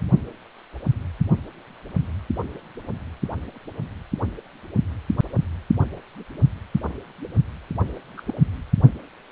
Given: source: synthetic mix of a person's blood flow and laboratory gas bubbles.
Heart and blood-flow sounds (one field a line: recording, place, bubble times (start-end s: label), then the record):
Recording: Doppler ultrasound of blood flow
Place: precordium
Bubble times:
8.17-8.21 s: bubbles
8.27-8.34 s: bubbles
From the record:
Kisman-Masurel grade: 111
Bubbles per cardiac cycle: 1 to 2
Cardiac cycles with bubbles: 1 to 10%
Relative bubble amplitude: barely perceptible (0.100 to 0.250)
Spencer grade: 1 (occasional bubble signal discernible with the cardiac motion signal, with majority of cardiac periods free of bubbles)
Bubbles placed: only in the low amplitude regions of the cardiac cycle